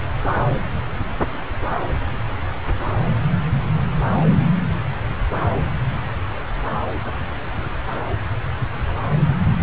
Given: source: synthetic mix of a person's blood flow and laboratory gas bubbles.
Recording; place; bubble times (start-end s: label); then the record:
Doppler ultrasound of blood flow; subclavian vein
9.59-9.63 s: bubbles
From the record:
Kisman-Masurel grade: 123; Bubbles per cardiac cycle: 1 to 2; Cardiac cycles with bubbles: 10 to 50%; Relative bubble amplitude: loud (0.450 to 0.775); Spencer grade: 2 (many but less than half of the cardiac periods contain bubble signals, singularly or in groups); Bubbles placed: anywhere in the cardiac cycle